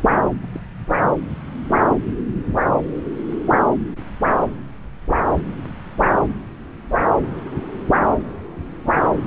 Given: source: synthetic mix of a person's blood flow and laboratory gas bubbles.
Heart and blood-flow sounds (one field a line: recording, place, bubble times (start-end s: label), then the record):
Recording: Doppler ultrasound of blood flow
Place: subclavian vein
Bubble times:
0.40-0.47 s: bubbles
0.52-0.60 s: bubbles
From the record:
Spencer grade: 1 (occasional bubble signal discernible with the cardiac motion signal, with majority of cardiac periods free of bubbles)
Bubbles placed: anywhere in the cardiac cycle